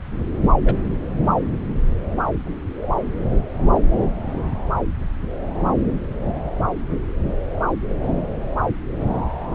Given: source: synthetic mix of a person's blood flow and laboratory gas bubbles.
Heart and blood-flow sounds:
Doppler ultrasound of blood flow; subclavian vein
0.65-0.73 s: bubbles
From the record:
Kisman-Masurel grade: 112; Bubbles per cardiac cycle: 1 to 2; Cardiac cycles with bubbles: 1 to 10%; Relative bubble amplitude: moderate (0.250 to 0.450); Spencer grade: 1 (occasional bubble signal discernible with the cardiac motion signal, with majority of cardiac periods free of bubbles); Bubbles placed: anywhere in the cardiac cycle

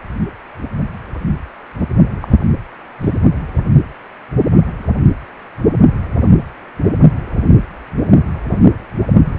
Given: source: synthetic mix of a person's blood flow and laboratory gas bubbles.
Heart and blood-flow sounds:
Doppler ultrasound of blood flow; precordium
2.21-2.28 s: bubbles
3.01-3.19 s: bubbles
From the record:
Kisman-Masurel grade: 112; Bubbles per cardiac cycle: 1 to 2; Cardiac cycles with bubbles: 1 to 10%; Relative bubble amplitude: moderate (0.250 to 0.450); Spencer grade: 1 (occasional bubble signal discernible with the cardiac motion signal, with majority of cardiac periods free of bubbles); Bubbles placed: only in the low amplitude regions of the cardiac cycle

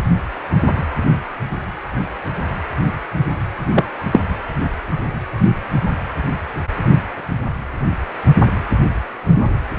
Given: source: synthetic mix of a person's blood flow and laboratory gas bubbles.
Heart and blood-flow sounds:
Doppler ultrasound of blood flow; precordium
3.74-3.85 s: bubbles
4.12-4.20 s: bubbles
From the record:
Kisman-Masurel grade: 113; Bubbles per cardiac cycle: 1 to 2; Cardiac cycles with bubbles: 1 to 10%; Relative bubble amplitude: loud (0.450 to 0.775); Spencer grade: 1 (occasional bubble signal discernible with the cardiac motion signal, with majority of cardiac periods free of bubbles); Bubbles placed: anywhere in the cardiac cycle

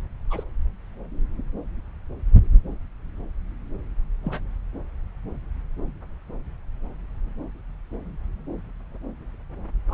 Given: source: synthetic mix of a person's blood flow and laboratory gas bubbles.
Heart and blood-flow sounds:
Doppler ultrasound of blood flow; subclavian vein
0.30-0.43 s: bubbles
4.24-4.41 s: bubbles
9.88-9.94 s: bubbles
From the record:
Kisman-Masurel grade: 121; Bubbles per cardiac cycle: 1 to 2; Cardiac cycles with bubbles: 10 to 50%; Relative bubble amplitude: barely perceptible (0.100 to 0.250); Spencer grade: 2 (many but less than half of the cardiac periods contain bubble signals, singularly or in groups); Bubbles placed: anywhere in the cardiac cycle

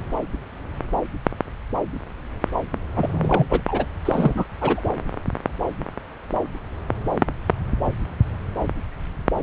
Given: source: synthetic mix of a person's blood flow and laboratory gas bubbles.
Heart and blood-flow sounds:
Doppler ultrasound of blood flow; subclavian vein
2.96-3.46 s: bubbles
3.49-3.62 s: bubbles
3.67-3.86 s: bubbles
4.05-4.45 s: bubbles
4.61-4.83 s: bubbles
From the record:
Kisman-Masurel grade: 222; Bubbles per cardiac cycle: several, 3 to 8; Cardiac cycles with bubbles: 10 to 50%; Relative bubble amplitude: moderate (0.250 to 0.450); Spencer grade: 2 (many but less than half of the cardiac periods contain bubble signals, singularly or in groups); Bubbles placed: anywhere in the cardiac cycle

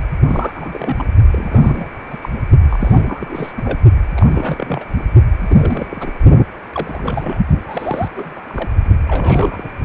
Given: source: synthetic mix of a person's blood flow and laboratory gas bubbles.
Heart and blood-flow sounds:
Doppler ultrasound of blood flow; precordium
0.28-1.03 s: bubbles
1.30-1.88 s: bubbles
2.06-2.17 s: bubbles
2.21-2.29 s: bubbles
2.69-3.02 s: bubbles
3.04-3.52 s: bubbles
3.56-3.79 s: bubbles
4.15-4.84 s: bubbles
5.36-6.13 s: bubbles
6.72-7.39 s: bubbles
7.58-8.10 s: bubbles
8.17-8.40 s: bubbles
8.43-8.74 s: bubbles
9.05-9.70 s: bubbles
From the record:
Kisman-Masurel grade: 342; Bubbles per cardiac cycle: rolling drumbeat, 9 or more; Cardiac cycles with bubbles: 100%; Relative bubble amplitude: moderate (0.250 to 0.450); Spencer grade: 3 (all of the cardiac periods contain showers or single bubble signals, but not dominating or overriding the cardiac motion signals); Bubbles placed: only in the low amplitude regions of the cardiac cycle

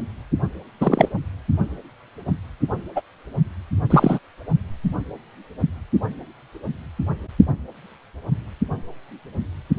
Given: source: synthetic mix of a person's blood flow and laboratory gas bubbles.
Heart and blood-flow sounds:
Doppler ultrasound of blood flow; precordium
0.80-1.09 s: bubbles
2.96-3.02 s: bubbles
3.90-4.18 s: bubbles
From the record:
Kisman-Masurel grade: 223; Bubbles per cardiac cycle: several, 3 to 8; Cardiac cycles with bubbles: 10 to 50%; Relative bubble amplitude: loud (0.450 to 0.775); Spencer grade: 2 (many but less than half of the cardiac periods contain bubble signals, singularly or in groups); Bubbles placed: only in the low amplitude regions of the cardiac cycle

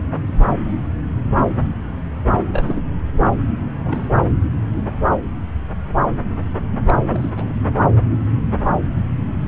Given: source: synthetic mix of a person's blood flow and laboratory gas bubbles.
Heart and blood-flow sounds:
Doppler ultrasound of blood flow; subclavian vein
2.52-2.82 s: bubbles
3.85-4.09 s: bubbles
6.88-6.95 s: bubbles
7.09-7.29 s: bubbles
7.36-7.52 s: bubbles
From the record:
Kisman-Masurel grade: 221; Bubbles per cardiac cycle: several, 3 to 8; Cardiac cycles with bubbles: 10 to 50%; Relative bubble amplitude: barely perceptible (0.100 to 0.250); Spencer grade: 2 (many but less than half of the cardiac periods contain bubble signals, singularly or in groups); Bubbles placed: anywhere in the cardiac cycle

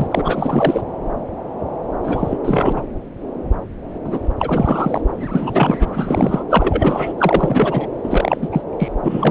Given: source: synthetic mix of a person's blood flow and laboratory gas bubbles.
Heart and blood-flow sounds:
Doppler ultrasound of blood flow; subclavian vein
0.00-0.07 s: bubbles
0.11-0.82 s: bubbles
2.04-2.38 s: bubbles
2.44-2.82 s: bubbles
4.04-4.18 s: bubbles
4.38-5.01 s: bubbles
5.14-5.76 s: bubbles
5.79-6.43 s: bubbles
6.50-7.13 s: bubbles
7.18-7.87 s: bubbles
8.04-8.49 s: bubbles
8.52-8.62 s: bubbles
8.79-8.88 s: bubbles
9.03-9.31 s: bubbles
From the record:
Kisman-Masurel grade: 333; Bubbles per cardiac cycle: rolling drumbeat, 9 or more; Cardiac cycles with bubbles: 50 to 99%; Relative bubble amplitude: loud (0.450 to 0.775); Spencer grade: 3 (all of the cardiac periods contain showers or single bubble signals, but not dominating or overriding the cardiac motion signals); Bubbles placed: anywhere in the cardiac cycle

